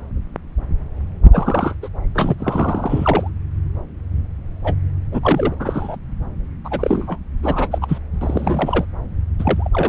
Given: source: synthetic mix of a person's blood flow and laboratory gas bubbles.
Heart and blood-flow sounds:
Doppler ultrasound of blood flow; subclavian vein
1.32-1.74 s: bubbles
1.82-1.89 s: bubbles
2.14-2.35 s: bubbles
2.38-3.29 s: bubbles
4.63-4.74 s: bubbles
5.12-5.55 s: bubbles
5.59-5.96 s: bubbles
6.64-7.18 s: bubbles
7.42-7.68 s: bubbles
7.71-7.79 s: bubbles
7.81-7.98 s: bubbles
8.21-8.86 s: bubbles
9.38-9.69 s: bubbles
9.71-9.89 s: bubbles
From the record:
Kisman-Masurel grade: 332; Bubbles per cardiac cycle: rolling drumbeat, 9 or more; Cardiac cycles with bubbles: 50 to 99%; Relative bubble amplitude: moderate (0.250 to 0.450); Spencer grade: 3 (all of the cardiac periods contain showers or single bubble signals, but not dominating or overriding the cardiac motion signals); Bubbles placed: anywhere in the cardiac cycle

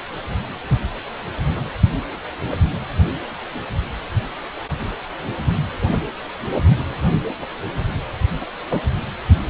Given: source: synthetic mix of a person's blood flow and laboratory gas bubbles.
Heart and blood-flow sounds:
Doppler ultrasound of blood flow; precordium
8.71-8.80 s: bubbles
From the record:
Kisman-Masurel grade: 113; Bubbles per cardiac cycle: 1 to 2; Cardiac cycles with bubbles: 1 to 10%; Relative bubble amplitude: loud (0.450 to 0.775); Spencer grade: 1 (occasional bubble signal discernible with the cardiac motion signal, with majority of cardiac periods free of bubbles); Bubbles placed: anywhere in the cardiac cycle

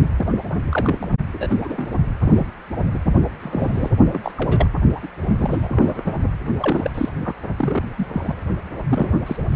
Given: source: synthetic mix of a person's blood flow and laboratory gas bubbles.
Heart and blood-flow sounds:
Doppler ultrasound of blood flow; precordium
0.17-0.39 s: bubbles
0.70-1.07 s: bubbles
1.33-1.87 s: bubbles
2.24-2.47 s: bubbles
2.94-2.99 s: bubbles
3.40-3.90 s: bubbles
4.12-4.32 s: bubbles
4.37-4.69 s: bubbles
4.95-5.00 s: bubbles
5.03-5.08 s: bubbles
5.38-6.01 s: bubbles
6.05-6.12 s: bubbles
6.59-6.91 s: bubbles
6.94-7.09 s: bubbles
7.21-7.34 s: bubbles
7.57-7.83 s: bubbles
7.97-8.07 s: bubbles
8.13-8.34 s: bubbles
8.90-9.11 s: bubbles
9.26-9.36 s: bubbles
9.52-9.56 s: bubbles
From the record:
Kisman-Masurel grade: 242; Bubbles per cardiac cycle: several, 3 to 8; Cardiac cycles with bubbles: 100%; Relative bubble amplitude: moderate (0.250 to 0.450); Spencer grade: 3 (all of the cardiac periods contain showers or single bubble signals, but not dominating or overriding the cardiac motion signals); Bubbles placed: only in the low amplitude regions of the cardiac cycle

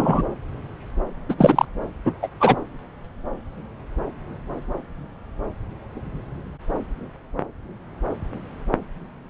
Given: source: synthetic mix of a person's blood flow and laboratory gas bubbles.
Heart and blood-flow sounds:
Doppler ultrasound of blood flow; subclavian vein
0.00-0.23 s: bubbles
1.29-1.35 s: bubbles
1.38-1.66 s: bubbles
2.04-2.12 s: bubbles
2.22-2.27 s: bubbles
2.40-2.56 s: bubbles
From the record:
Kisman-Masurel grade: 223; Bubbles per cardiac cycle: several, 3 to 8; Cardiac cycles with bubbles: 10 to 50%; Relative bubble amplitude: loud (0.450 to 0.775); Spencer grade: 2 (many but less than half of the cardiac periods contain bubble signals, singularly or in groups); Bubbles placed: anywhere in the cardiac cycle

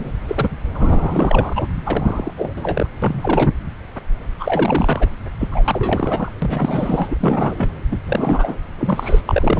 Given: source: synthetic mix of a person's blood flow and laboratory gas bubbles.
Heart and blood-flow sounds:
Doppler ultrasound of blood flow; subclavian vein
0.00-0.12 s: bubbles
0.27-0.48 s: bubbles
0.73-1.67 s: bubbles
1.84-2.34 s: bubbles
2.37-2.53 s: bubbles
2.56-2.87 s: bubbles
3.02-3.52 s: bubbles
4.39-5.07 s: bubbles
5.40-5.48 s: bubbles
5.51-5.62 s: bubbles
5.65-6.31 s: bubbles
6.42-7.73 s: bubbles
7.91-7.98 s: bubbles
8.06-8.56 s: bubbles
8.79-9.21 s: bubbles
9.26-9.60 s: bubbles
From the record:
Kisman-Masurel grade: 332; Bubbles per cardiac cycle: rolling drumbeat, 9 or more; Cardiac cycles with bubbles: 50 to 99%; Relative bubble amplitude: moderate (0.250 to 0.450); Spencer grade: 3 (all of the cardiac periods contain showers or single bubble signals, but not dominating or overriding the cardiac motion signals); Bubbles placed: anywhere in the cardiac cycle

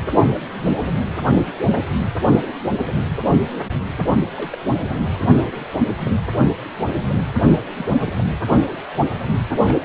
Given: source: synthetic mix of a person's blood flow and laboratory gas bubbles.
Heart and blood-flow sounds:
Doppler ultrasound of blood flow; precordium
4.36-4.58 s: bubbles
5.15-5.64 s: bubbles
5.79-5.88 s: bubbles
6.05-6.10 s: bubbles
7.76-8.13 s: bubbles
8.18-8.24 s: bubbles
9.52-9.57 s: bubbles
9.63-9.79 s: bubbles
9.81-9.85 s: bubbles
From the record:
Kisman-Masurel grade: 221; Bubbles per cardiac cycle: several, 3 to 8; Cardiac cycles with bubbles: 10 to 50%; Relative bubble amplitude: barely perceptible (0.100 to 0.250); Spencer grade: 2 (many but less than half of the cardiac periods contain bubble signals, singularly or in groups); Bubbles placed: anywhere in the cardiac cycle

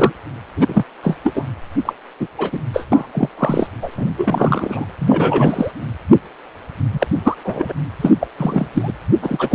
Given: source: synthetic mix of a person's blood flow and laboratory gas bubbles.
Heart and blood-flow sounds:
Doppler ultrasound of blood flow; precordium
0.00-0.12 s: bubbles
0.56-0.83 s: bubbles
1.02-1.17 s: bubbles
1.23-1.44 s: bubbles
1.85-1.93 s: bubbles
2.20-2.27 s: bubbles
2.39-2.59 s: bubbles
2.73-2.86 s: bubbles
2.92-3.06 s: bubbles
3.13-3.29 s: bubbles
3.38-3.67 s: bubbles
3.81-3.91 s: bubbles
3.97-4.05 s: bubbles
4.17-4.85 s: bubbles
4.99-5.71 s: bubbles
6.93-7.07 s: bubbles
7.24-7.36 s: bubbles
7.44-7.73 s: bubbles
8.02-8.12 s: bubbles
8.20-8.27 s: bubbles
8.37-8.69 s: bubbles
8.73-8.92 s: bubbles
9.21-9.55 s: bubbles
From the record:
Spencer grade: 3 (all of the cardiac periods contain showers or single bubble signals, but not dominating or overriding the cardiac motion signals); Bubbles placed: anywhere in the cardiac cycle

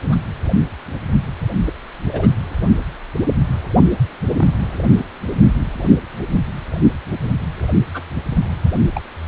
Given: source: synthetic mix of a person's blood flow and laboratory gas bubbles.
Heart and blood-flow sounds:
Doppler ultrasound of blood flow; precordium
0.12-0.16 s: bubbles
1.66-1.73 s: bubbles
2.08-2.29 s: bubbles
4.37-4.61 s: bubbles
7.93-8.05 s: bubbles
8.95-9.01 s: bubbles
From the record:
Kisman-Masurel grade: 121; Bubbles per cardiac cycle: 1 to 2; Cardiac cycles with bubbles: 10 to 50%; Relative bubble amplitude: barely perceptible (0.100 to 0.250); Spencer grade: 2 (many but less than half of the cardiac periods contain bubble signals, singularly or in groups); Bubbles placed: anywhere in the cardiac cycle

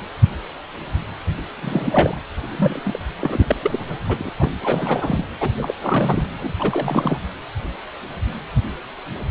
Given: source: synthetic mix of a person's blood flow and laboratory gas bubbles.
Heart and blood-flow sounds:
Doppler ultrasound of blood flow; precordium
1.61-2.21 s: bubbles
2.48-2.99 s: bubbles
3.21-3.56 s: bubbles
3.62-3.97 s: bubbles
4.08-4.31 s: bubbles
4.38-4.51 s: bubbles
4.63-5.24 s: bubbles
5.41-5.50 s: bubbles
5.57-5.74 s: bubbles
5.80-6.25 s: bubbles
6.39-6.52 s: bubbles
6.56-7.18 s: bubbles
From the record:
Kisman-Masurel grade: 332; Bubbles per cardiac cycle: rolling drumbeat, 9 or more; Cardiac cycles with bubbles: 50 to 99%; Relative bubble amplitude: moderate (0.250 to 0.450); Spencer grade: 3 (all of the cardiac periods contain showers or single bubble signals, but not dominating or overriding the cardiac motion signals); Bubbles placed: anywhere in the cardiac cycle

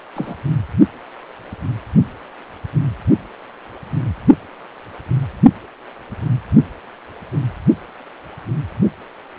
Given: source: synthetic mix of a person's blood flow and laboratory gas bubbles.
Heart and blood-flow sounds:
Doppler ultrasound of blood flow; precordium
0.15-0.35 s: bubbles
From the record:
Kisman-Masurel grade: 112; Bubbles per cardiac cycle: 1 to 2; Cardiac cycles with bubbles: 1 to 10%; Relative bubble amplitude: moderate (0.250 to 0.450); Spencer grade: 1 (occasional bubble signal discernible with the cardiac motion signal, with majority of cardiac periods free of bubbles); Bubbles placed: only in the low amplitude regions of the cardiac cycle

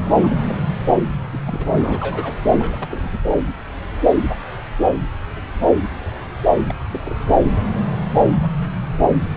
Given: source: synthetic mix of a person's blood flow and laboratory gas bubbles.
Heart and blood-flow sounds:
Doppler ultrasound of blood flow; subclavian vein
0.19-0.41 s: bubbles
0.46-0.59 s: bubbles
1.32-1.38 s: bubbles
1.46-1.66 s: bubbles
1.70-2.35 s: bubbles
2.50-2.88 s: bubbles
2.91-3.09 s: bubbles
3.12-3.20 s: bubbles
6.68-6.73 s: bubbles
6.90-7.01 s: bubbles
7.04-7.17 s: bubbles
From the record:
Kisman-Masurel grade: 221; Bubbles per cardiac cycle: several, 3 to 8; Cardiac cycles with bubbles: 10 to 50%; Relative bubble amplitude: barely perceptible (0.100 to 0.250); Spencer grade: 2 (many but less than half of the cardiac periods contain bubble signals, singularly or in groups); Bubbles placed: anywhere in the cardiac cycle

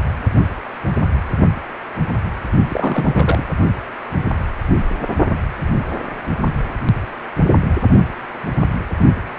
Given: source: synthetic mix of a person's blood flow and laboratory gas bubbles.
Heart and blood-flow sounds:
Doppler ultrasound of blood flow; precordium
2.63-3.47 s: bubbles
From the record:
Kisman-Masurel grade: 222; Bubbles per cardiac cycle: several, 3 to 8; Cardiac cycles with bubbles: 10 to 50%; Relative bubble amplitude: moderate (0.250 to 0.450); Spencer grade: 2 (many but less than half of the cardiac periods contain bubble signals, singularly or in groups); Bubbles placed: only in the low amplitude regions of the cardiac cycle

